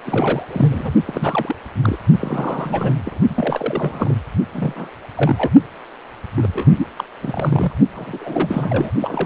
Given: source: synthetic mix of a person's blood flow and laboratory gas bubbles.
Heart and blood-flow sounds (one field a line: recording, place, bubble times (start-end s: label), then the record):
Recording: Doppler ultrasound of blood flow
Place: precordium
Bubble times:
0.05-0.43 s: bubbles
0.50-0.94 s: bubbles
1.05-1.56 s: bubbles
1.83-1.97 s: bubbles
2.21-2.96 s: bubbles
3.06-3.19 s: bubbles
3.29-4.15 s: bubbles
4.52-4.90 s: bubbles
5.16-5.51 s: bubbles
6.35-6.67 s: bubbles
6.78-6.87 s: bubbles
6.97-7.04 s: bubbles
7.23-7.73 s: bubbles
7.95-8.18 s: bubbles
8.20-8.90 s: bubbles
9.00-9.25 s: bubbles
From the record:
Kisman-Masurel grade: 332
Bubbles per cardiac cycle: rolling drumbeat, 9 or more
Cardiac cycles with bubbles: 50 to 99%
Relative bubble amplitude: moderate (0.250 to 0.450)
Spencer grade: 3 (all of the cardiac periods contain showers or single bubble signals, but not dominating or overriding the cardiac motion signals)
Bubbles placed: only in the low amplitude regions of the cardiac cycle